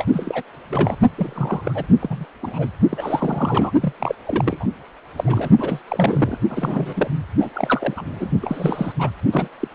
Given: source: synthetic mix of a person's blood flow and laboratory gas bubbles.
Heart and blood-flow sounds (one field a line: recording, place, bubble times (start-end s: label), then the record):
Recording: Doppler ultrasound of blood flow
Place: precordium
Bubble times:
0.00-0.06 s: bubbles
0.12-0.42 s: bubbles
0.70-0.96 s: bubbles
1.17-1.85 s: bubbles
2.00-2.25 s: bubbles
2.42-2.66 s: bubbles
2.90-3.71 s: bubbles
3.80-3.93 s: bubbles
4.00-4.15 s: bubbles
4.25-4.66 s: bubbles
5.16-5.50 s: bubbles
5.58-5.80 s: bubbles
5.88-6.38 s: bubbles
6.50-7.08 s: bubbles
7.40-7.50 s: bubbles
7.54-8.30 s: bubbles
8.41-8.92 s: bubbles
8.99-9.10 s: bubbles
9.31-9.48 s: bubbles
9.60-9.68 s: bubbles
From the record:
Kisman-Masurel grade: 332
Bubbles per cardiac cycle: rolling drumbeat, 9 or more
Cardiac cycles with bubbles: 50 to 99%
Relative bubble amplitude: moderate (0.250 to 0.450)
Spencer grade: 3 (all of the cardiac periods contain showers or single bubble signals, but not dominating or overriding the cardiac motion signals)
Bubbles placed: only in the low amplitude regions of the cardiac cycle